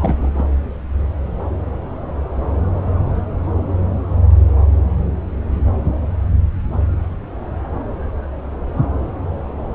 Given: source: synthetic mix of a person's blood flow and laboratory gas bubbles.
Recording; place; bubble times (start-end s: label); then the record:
Doppler ultrasound of blood flow; subclavian vein
0.00-0.44 s: bubbles
From the record:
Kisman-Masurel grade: 222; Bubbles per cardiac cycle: several, 3 to 8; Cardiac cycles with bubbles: 10 to 50%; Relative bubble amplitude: moderate (0.250 to 0.450); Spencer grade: 2 (many but less than half of the cardiac periods contain bubble signals, singularly or in groups); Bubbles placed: anywhere in the cardiac cycle